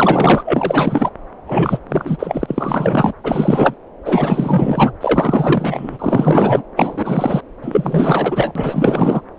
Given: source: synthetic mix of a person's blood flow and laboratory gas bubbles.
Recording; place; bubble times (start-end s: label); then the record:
Doppler ultrasound of blood flow; subclavian vein
0.00-1.11 s: bubbles
1.47-1.79 s: bubbles
1.89-3.12 s: bubbles
3.24-3.74 s: bubbles
4.05-4.94 s: bubbles
5.00-6.62 s: bubbles
6.76-7.42 s: bubbles
7.62-9.21 s: bubbles
From the record:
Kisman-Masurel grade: 444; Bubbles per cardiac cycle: continuous sound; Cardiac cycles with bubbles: 100%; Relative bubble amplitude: maximal (0.775 to 0.999); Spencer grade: 4 (maximum detectable bubble signal sounding continuously throughout systole and diastole of every cardiac period, and overriding the amplitude of the normal cardiac signals); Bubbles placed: anywhere in the cardiac cycle